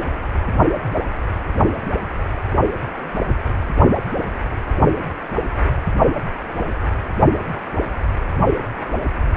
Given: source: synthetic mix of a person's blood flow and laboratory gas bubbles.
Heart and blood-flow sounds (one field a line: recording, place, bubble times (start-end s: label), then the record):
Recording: Doppler ultrasound of blood flow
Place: precordium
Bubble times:
no bubbles
From the record:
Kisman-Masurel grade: 000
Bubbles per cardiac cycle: 0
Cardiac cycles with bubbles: 0%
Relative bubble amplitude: no bubbles discernible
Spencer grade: 0 (complete lack of bubble signals)